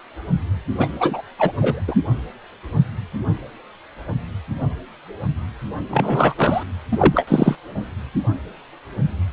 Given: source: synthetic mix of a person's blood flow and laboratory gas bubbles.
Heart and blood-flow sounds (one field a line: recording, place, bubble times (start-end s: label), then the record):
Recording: Doppler ultrasound of blood flow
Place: precordium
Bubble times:
0.78-0.90 s: bubbles
0.99-1.22 s: bubbles
1.38-1.51 s: bubbles
1.59-1.82 s: bubbles
1.87-1.95 s: bubbles
5.90-6.35 s: bubbles
6.37-6.64 s: bubbles
6.92-7.56 s: bubbles
From the record:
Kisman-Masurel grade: 223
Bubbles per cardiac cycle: several, 3 to 8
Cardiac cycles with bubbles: 10 to 50%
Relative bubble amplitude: loud (0.450 to 0.775)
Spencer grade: 2 (many but less than half of the cardiac periods contain bubble signals, singularly or in groups)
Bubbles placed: anywhere in the cardiac cycle